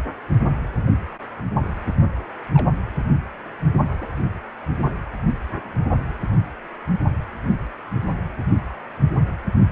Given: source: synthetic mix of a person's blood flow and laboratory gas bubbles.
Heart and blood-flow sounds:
Doppler ultrasound of blood flow; precordium
1.85-1.92 s: bubbles
2.53-2.73 s: bubbles
From the record:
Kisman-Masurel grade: 111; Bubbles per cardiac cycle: 1 to 2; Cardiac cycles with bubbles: 1 to 10%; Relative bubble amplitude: barely perceptible (0.100 to 0.250); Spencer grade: 1 (occasional bubble signal discernible with the cardiac motion signal, with majority of cardiac periods free of bubbles); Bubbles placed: anywhere in the cardiac cycle

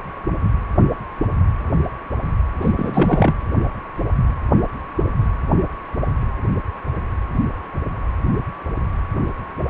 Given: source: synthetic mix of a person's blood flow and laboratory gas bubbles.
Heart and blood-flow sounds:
Doppler ultrasound of blood flow; precordium
2.61-2.72 s: bubbles
2.76-3.34 s: bubbles
From the record:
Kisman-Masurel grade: 212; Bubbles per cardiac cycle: several, 3 to 8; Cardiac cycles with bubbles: 1 to 10%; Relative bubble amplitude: moderate (0.250 to 0.450); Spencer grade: 1 (occasional bubble signal discernible with the cardiac motion signal, with majority of cardiac periods free of bubbles); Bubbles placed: anywhere in the cardiac cycle

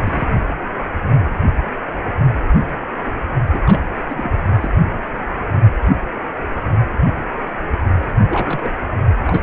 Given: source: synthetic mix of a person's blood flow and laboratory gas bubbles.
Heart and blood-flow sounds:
Doppler ultrasound of blood flow; precordium
0.00-0.25 s: bubbles
3.52-3.59 s: bubbles
3.66-3.81 s: bubbles
4.09-4.31 s: bubbles
4.56-4.71 s: bubbles
8.29-8.79 s: bubbles
9.27-9.43 s: bubbles
From the record:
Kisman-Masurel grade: 222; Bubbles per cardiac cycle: several, 3 to 8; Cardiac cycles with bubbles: 10 to 50%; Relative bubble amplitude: moderate (0.250 to 0.450); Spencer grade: 2 (many but less than half of the cardiac periods contain bubble signals, singularly or in groups); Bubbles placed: anywhere in the cardiac cycle

